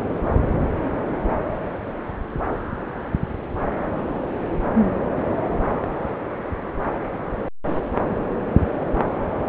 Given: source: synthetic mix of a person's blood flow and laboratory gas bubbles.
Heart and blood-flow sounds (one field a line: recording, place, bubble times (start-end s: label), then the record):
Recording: Doppler ultrasound of blood flow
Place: subclavian vein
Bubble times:
no bubbles
From the record:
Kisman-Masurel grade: 000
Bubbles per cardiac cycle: 0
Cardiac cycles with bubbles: 0%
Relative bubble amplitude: no bubbles discernible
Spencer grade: 0 (complete lack of bubble signals)